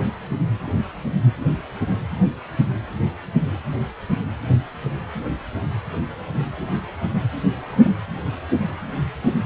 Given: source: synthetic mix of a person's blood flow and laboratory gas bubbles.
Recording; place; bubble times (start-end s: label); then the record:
Doppler ultrasound of blood flow; precordium
7.71-7.92 s: bubbles
From the record:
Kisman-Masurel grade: 111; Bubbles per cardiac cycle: 1 to 2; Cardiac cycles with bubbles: 1 to 10%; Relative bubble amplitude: barely perceptible (0.100 to 0.250); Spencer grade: 1 (occasional bubble signal discernible with the cardiac motion signal, with majority of cardiac periods free of bubbles); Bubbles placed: anywhere in the cardiac cycle